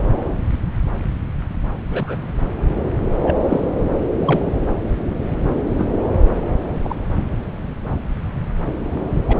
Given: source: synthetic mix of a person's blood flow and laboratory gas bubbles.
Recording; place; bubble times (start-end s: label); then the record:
Doppler ultrasound of blood flow; subclavian vein
1.90-2.17 s: bubbles
3.22-3.35 s: bubbles
3.48-3.62 s: bubbles
4.25-4.43 s: bubbles
5.78-5.86 s: bubbles
6.83-6.96 s: bubbles
9.27-9.37 s: bubbles
From the record:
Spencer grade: 2 (many but less than half of the cardiac periods contain bubble signals, singularly or in groups); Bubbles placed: anywhere in the cardiac cycle